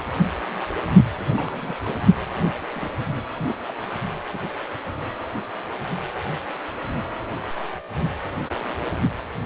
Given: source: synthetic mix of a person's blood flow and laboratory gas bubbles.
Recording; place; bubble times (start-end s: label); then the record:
Doppler ultrasound of blood flow; precordium
1.15-1.75 s: bubbles
1.84-1.97 s: bubbles
2.74-2.91 s: bubbles
3.35-3.47 s: bubbles
3.68-3.74 s: bubbles
4.33-4.38 s: bubbles
From the record:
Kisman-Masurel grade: 221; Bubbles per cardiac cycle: several, 3 to 8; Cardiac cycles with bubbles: 10 to 50%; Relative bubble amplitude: barely perceptible (0.100 to 0.250); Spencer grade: 2 (many but less than half of the cardiac periods contain bubble signals, singularly or in groups); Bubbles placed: anywhere in the cardiac cycle